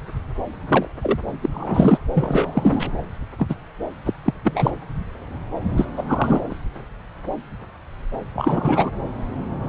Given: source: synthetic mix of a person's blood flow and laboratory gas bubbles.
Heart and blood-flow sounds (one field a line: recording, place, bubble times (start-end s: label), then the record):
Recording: Doppler ultrasound of blood flow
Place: subclavian vein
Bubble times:
0.68-0.88 s: bubbles
1.02-1.18 s: bubbles
1.42-1.49 s: bubbles
1.51-1.99 s: bubbles
2.14-2.93 s: bubbles
3.38-3.55 s: bubbles
4.05-4.11 s: bubbles
4.25-4.33 s: bubbles
4.43-4.71 s: bubbles
5.76-5.88 s: bubbles
5.97-6.56 s: bubbles
8.35-8.90 s: bubbles
From the record:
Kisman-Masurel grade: 223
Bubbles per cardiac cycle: several, 3 to 8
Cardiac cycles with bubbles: 10 to 50%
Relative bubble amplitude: loud (0.450 to 0.775)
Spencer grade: 2 (many but less than half of the cardiac periods contain bubble signals, singularly or in groups)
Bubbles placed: anywhere in the cardiac cycle